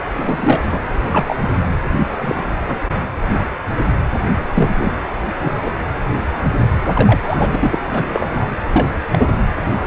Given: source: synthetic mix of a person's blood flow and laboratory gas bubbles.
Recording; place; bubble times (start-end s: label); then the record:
Doppler ultrasound of blood flow; precordium
0.14-0.80 s: bubbles
1.12-1.36 s: bubbles
2.17-2.43 s: bubbles
2.67-2.81 s: bubbles
4.54-4.71 s: bubbles
4.78-4.92 s: bubbles
5.41-5.52 s: bubbles
5.65-5.73 s: bubbles
6.84-7.79 s: bubbles
7.90-8.48 s: bubbles
8.71-8.88 s: bubbles
9.12-9.29 s: bubbles
9.77-9.87 s: bubbles
From the record:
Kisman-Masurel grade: 232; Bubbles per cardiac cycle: several, 3 to 8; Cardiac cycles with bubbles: 50 to 99%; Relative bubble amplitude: moderate (0.250 to 0.450); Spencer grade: 3 (all of the cardiac periods contain showers or single bubble signals, but not dominating or overriding the cardiac motion signals); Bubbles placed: anywhere in the cardiac cycle